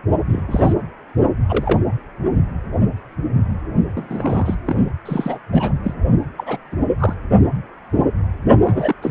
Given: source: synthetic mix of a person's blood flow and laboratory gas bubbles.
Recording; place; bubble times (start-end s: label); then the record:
Doppler ultrasound of blood flow; precordium
0.28-0.46 s: bubbles
0.48-0.73 s: bubbles
1.49-1.83 s: bubbles
3.95-4.55 s: bubbles
4.67-4.89 s: bubbles
5.05-5.38 s: bubbles
5.51-5.73 s: bubbles
5.83-5.94 s: bubbles
6.37-6.57 s: bubbles
6.72-6.76 s: bubbles
6.98-7.13 s: bubbles
8.63-8.94 s: bubbles
9.02-9.11 s: bubbles
From the record:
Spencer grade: 3 (all of the cardiac periods contain showers or single bubble signals, but not dominating or overriding the cardiac motion signals); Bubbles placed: only in the low amplitude regions of the cardiac cycle